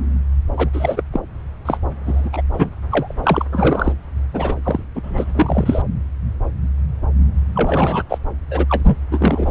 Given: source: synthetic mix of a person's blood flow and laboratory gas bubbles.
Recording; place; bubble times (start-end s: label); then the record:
Doppler ultrasound of blood flow; subclavian vein
0.56-0.70 s: bubbles
0.73-1.03 s: bubbles
1.11-1.20 s: bubbles
1.65-1.78 s: bubbles
2.05-2.29 s: bubbles
2.32-2.42 s: bubbles
2.53-2.69 s: bubbles
2.88-3.15 s: bubbles
3.23-3.45 s: bubbles
3.52-3.93 s: bubbles
4.33-4.56 s: bubbles
4.63-4.83 s: bubbles
4.95-5.82 s: bubbles
7.54-8.03 s: bubbles
8.09-8.18 s: bubbles
8.51-8.66 s: bubbles
8.70-8.98 s: bubbles
9.11-9.51 s: bubbles
From the record:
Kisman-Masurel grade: 233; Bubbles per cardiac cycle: several, 3 to 8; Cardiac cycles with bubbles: 50 to 99%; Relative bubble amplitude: loud (0.450 to 0.775); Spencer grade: 3 (all of the cardiac periods contain showers or single bubble signals, but not dominating or overriding the cardiac motion signals); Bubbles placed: anywhere in the cardiac cycle